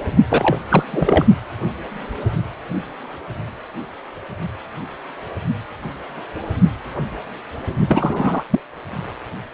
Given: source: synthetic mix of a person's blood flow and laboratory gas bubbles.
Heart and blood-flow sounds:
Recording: Doppler ultrasound of blood flow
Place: precordium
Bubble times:
0.29-0.58 s: bubbles
0.69-0.83 s: bubbles
0.90-1.25 s: bubbles
7.88-8.44 s: bubbles
8.50-8.60 s: bubbles
From the record:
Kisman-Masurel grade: 223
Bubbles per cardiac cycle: several, 3 to 8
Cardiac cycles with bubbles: 10 to 50%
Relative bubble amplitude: loud (0.450 to 0.775)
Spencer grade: 2 (many but less than half of the cardiac periods contain bubble signals, singularly or in groups)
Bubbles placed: only in the low amplitude regions of the cardiac cycle

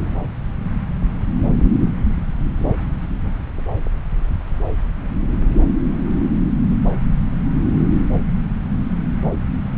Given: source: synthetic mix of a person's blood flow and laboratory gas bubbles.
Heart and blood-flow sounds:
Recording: Doppler ultrasound of blood flow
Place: subclavian vein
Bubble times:
no bubbles
From the record:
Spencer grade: 0 (complete lack of bubble signals)

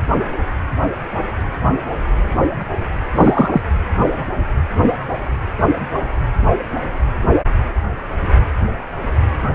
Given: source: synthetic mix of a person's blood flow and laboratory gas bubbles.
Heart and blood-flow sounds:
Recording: Doppler ultrasound of blood flow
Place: precordium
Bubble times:
3.14-3.61 s: bubbles
From the record:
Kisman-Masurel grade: 113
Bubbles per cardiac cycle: 1 to 2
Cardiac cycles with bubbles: 1 to 10%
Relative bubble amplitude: loud (0.450 to 0.775)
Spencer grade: 1 (occasional bubble signal discernible with the cardiac motion signal, with majority of cardiac periods free of bubbles)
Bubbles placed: anywhere in the cardiac cycle

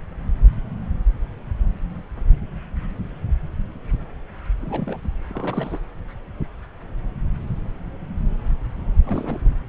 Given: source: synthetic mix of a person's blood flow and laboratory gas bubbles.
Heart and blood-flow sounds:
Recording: Doppler ultrasound of blood flow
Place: subclavian vein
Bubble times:
4.60-4.99 s: bubbles
5.04-5.08 s: bubbles
5.29-5.79 s: bubbles
9.04-9.49 s: bubbles
From the record:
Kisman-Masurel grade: 221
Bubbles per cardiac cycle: several, 3 to 8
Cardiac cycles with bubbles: 10 to 50%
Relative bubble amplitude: barely perceptible (0.100 to 0.250)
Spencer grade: 2 (many but less than half of the cardiac periods contain bubble signals, singularly or in groups)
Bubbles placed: anywhere in the cardiac cycle

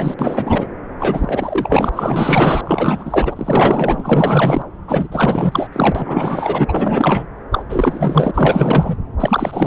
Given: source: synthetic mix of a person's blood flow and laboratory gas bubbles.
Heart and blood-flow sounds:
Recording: Doppler ultrasound of blood flow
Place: subclavian vein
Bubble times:
0.00-0.14 s: bubbles
0.19-0.66 s: bubbles
0.99-2.61 s: bubbles
2.64-4.62 s: bubbles
4.88-5.08 s: bubbles
5.12-5.67 s: bubbles
5.73-6.65 s: bubbles
6.67-7.27 s: bubbles
7.51-7.62 s: bubbles
7.69-8.31 s: bubbles
8.34-8.97 s: bubbles
9.20-9.66 s: bubbles
From the record:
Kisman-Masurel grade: 444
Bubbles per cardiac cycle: continuous sound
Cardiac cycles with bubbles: 100%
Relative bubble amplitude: maximal (0.775 to 0.999)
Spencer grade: 4 (maximum detectable bubble signal sounding continuously throughout systole and diastole of every cardiac period, and overriding the amplitude of the normal cardiac signals)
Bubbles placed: anywhere in the cardiac cycle

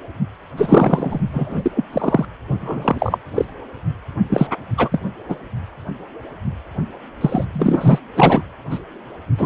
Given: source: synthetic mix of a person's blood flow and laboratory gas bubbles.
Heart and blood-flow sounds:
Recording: Doppler ultrasound of blood flow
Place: precordium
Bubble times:
0.57-1.19 s: bubbles
1.33-1.71 s: bubbles
1.74-1.84 s: bubbles
1.92-2.25 s: bubbles
2.60-3.19 s: bubbles
3.34-3.45 s: bubbles
4.29-4.47 s: bubbles
4.77-5.00 s: bubbles
5.29-5.36 s: bubbles
7.21-7.45 s: bubbles
7.53-7.99 s: bubbles
8.16-8.43 s: bubbles
8.70-8.79 s: bubbles
9.38-9.46 s: bubbles
From the record:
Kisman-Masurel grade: 233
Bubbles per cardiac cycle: several, 3 to 8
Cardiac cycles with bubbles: 50 to 99%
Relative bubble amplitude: loud (0.450 to 0.775)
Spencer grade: 3 (all of the cardiac periods contain showers or single bubble signals, but not dominating or overriding the cardiac motion signals)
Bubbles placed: anywhere in the cardiac cycle

